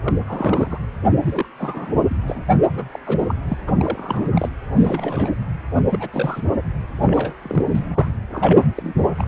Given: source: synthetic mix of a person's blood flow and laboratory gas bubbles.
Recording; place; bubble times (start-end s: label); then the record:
Doppler ultrasound of blood flow; precordium
0.04-0.14 s: bubbles
0.27-0.78 s: bubbles
1.17-1.49 s: bubbles
1.58-1.93 s: bubbles
2.08-2.42 s: bubbles
2.70-2.88 s: bubbles
2.92-2.99 s: bubbles
3.06-3.35 s: bubbles
3.48-3.57 s: bubbles
3.67-4.50 s: bubbles
4.75-5.31 s: bubbles
5.91-6.09 s: bubbles
6.12-6.42 s: bubbles
6.99-7.35 s: bubbles
7.42-7.64 s: bubbles
7.73-8.12 s: bubbles
8.31-8.68 s: bubbles
8.76-8.95 s: bubbles
9.18-9.26 s: bubbles
From the record:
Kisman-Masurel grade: 342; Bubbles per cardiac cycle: rolling drumbeat, 9 or more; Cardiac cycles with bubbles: 100%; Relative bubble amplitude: moderate (0.250 to 0.450); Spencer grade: 3 (all of the cardiac periods contain showers or single bubble signals, but not dominating or overriding the cardiac motion signals); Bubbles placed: anywhere in the cardiac cycle